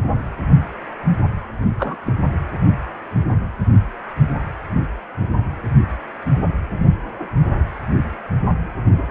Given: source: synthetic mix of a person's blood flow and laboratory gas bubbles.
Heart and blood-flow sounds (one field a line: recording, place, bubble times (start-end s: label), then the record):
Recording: Doppler ultrasound of blood flow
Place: precordium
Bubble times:
1.78-1.96 s: bubbles
2.06-2.13 s: bubbles
From the record:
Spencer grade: 1 (occasional bubble signal discernible with the cardiac motion signal, with majority of cardiac periods free of bubbles)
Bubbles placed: only in the low amplitude regions of the cardiac cycle